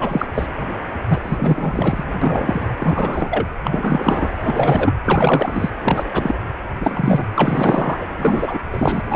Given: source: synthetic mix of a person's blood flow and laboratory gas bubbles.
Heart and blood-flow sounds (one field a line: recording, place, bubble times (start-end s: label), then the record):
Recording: Doppler ultrasound of blood flow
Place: precordium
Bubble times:
0.00-0.26 s: bubbles
0.34-0.46 s: bubbles
1.08-2.05 s: bubbles
2.22-2.67 s: bubbles
2.77-3.46 s: bubbles
3.64-4.31 s: bubbles
4.43-4.94 s: bubbles
5.04-5.70 s: bubbles
5.82-6.04 s: bubbles
6.13-6.34 s: bubbles
6.80-7.26 s: bubbles
7.36-7.98 s: bubbles
8.00-8.05 s: bubbles
8.17-8.57 s: bubbles
8.71-9.02 s: bubbles
9.06-9.16 s: bubbles
From the record:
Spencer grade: 3 (all of the cardiac periods contain showers or single bubble signals, but not dominating or overriding the cardiac motion signals)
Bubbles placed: anywhere in the cardiac cycle